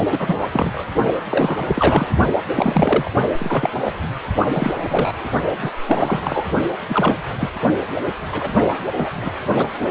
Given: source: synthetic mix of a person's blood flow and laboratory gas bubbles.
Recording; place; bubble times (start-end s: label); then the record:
Doppler ultrasound of blood flow; precordium
0.11-0.49 s: bubbles
0.52-0.84 s: bubbles
1.30-2.08 s: bubbles
2.56-3.11 s: bubbles
3.38-3.69 s: bubbles
3.84-3.93 s: bubbles
4.46-5.27 s: bubbles
5.62-5.71 s: bubbles
5.86-6.46 s: bubbles
6.88-7.15 s: bubbles
7.39-7.50 s: bubbles
8.31-8.49 s: bubbles
8.96-9.10 s: bubbles
9.15-9.32 s: bubbles
9.55-9.68 s: bubbles
9.79-9.91 s: bubbles
From the record:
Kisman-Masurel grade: 243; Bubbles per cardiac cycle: several, 3 to 8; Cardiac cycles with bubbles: 100%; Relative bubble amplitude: loud (0.450 to 0.775); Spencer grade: 3 (all of the cardiac periods contain showers or single bubble signals, but not dominating or overriding the cardiac motion signals); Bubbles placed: only in the low amplitude regions of the cardiac cycle